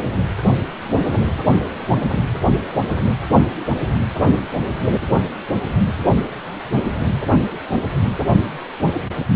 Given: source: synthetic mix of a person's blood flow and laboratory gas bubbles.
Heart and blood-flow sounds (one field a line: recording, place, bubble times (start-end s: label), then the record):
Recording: Doppler ultrasound of blood flow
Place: precordium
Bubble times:
no bubbles
From the record:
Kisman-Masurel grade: 000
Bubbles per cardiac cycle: 0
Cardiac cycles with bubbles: 0%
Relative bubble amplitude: no bubbles discernible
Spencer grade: 0 (complete lack of bubble signals)